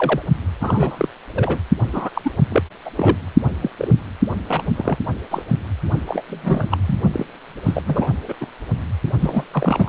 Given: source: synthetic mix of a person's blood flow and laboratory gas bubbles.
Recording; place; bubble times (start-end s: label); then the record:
Doppler ultrasound of blood flow; precordium
0.00-0.22 s: bubbles
0.60-1.08 s: bubbles
1.35-1.59 s: bubbles
1.92-2.10 s: bubbles
2.15-2.32 s: bubbles
2.50-2.62 s: bubbles
2.85-2.90 s: bubbles
2.96-3.17 s: bubbles
3.62-3.71 s: bubbles
3.79-3.92 s: bubbles
4.49-4.63 s: bubbles
4.76-4.98 s: bubbles
5.30-5.42 s: bubbles
6.06-6.21 s: bubbles
6.28-6.78 s: bubbles
6.86-6.98 s: bubbles
7.12-7.25 s: bubbles
7.65-7.82 s: bubbles
7.86-8.09 s: bubbles
8.28-8.33 s: bubbles
8.41-8.46 s: bubbles
9.19-9.44 s: bubbles
9.53-9.88 s: bubbles
From the record:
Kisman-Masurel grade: 242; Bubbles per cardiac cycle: several, 3 to 8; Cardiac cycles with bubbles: 100%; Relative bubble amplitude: moderate (0.250 to 0.450); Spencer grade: 3 (all of the cardiac periods contain showers or single bubble signals, but not dominating or overriding the cardiac motion signals); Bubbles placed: only in the low amplitude regions of the cardiac cycle